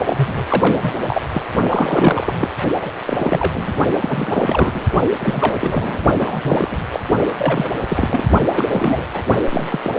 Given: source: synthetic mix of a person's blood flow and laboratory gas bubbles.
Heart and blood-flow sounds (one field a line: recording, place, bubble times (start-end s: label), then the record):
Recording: Doppler ultrasound of blood flow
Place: precordium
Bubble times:
0.00-0.46 s: bubbles
0.50-1.22 s: bubbles
1.31-1.42 s: bubbles
1.69-2.34 s: bubbles
2.38-2.50 s: bubbles
2.81-2.93 s: bubbles
3.06-3.74 s: bubbles
3.99-4.87 s: bubbles
5.20-5.55 s: bubbles
5.60-6.03 s: bubbles
6.18-6.78 s: bubbles
6.92-7.00 s: bubbles
7.38-7.72 s: bubbles
7.90-8.28 s: bubbles
8.47-8.64 s: bubbles
8.68-9.05 s: bubbles
9.13-9.23 s: bubbles
9.50-9.79 s: bubbles
9.83-9.90 s: bubbles
From the record:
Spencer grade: 3 (all of the cardiac periods contain showers or single bubble signals, but not dominating or overriding the cardiac motion signals)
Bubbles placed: only in the low amplitude regions of the cardiac cycle